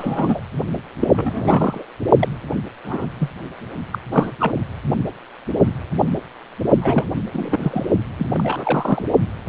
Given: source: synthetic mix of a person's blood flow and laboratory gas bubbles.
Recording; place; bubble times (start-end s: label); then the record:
Doppler ultrasound of blood flow; precordium
0.00-0.42 s: bubbles
1.01-1.85 s: bubbles
2.19-2.28 s: bubbles
2.84-3.07 s: bubbles
3.19-3.29 s: bubbles
3.93-3.98 s: bubbles
4.12-4.33 s: bubbles
4.39-4.53 s: bubbles
6.81-7.12 s: bubbles
7.32-7.86 s: bubbles
8.18-8.27 s: bubbles
8.33-9.07 s: bubbles
From the record:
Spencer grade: 3 (all of the cardiac periods contain showers or single bubble signals, but not dominating or overriding the cardiac motion signals); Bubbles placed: only in the low amplitude regions of the cardiac cycle